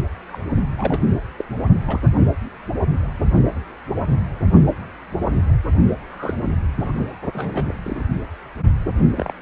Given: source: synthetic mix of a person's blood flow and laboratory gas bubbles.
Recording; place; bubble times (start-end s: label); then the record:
Doppler ultrasound of blood flow; precordium
0.27-0.39 s: bubbles
0.78-0.99 s: bubbles
1.38-1.44 s: bubbles
1.86-2.00 s: bubbles
6.11-6.34 s: bubbles
6.78-7.16 s: bubbles
7.33-7.75 s: bubbles
7.83-8.04 s: bubbles
9.16-9.34 s: bubbles
From the record:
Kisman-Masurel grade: 232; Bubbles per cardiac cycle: several, 3 to 8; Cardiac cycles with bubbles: 50 to 99%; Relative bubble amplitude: moderate (0.250 to 0.450); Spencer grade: 3 (all of the cardiac periods contain showers or single bubble signals, but not dominating or overriding the cardiac motion signals); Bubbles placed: only in the low amplitude regions of the cardiac cycle